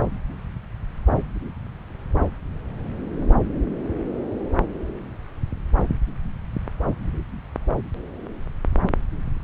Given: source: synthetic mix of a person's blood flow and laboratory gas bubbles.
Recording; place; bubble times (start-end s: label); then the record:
Doppler ultrasound of blood flow; subclavian vein
no bubbles
From the record:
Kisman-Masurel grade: 000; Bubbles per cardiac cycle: 0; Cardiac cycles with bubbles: 0%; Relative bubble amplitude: no bubbles discernible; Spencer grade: 0 (complete lack of bubble signals)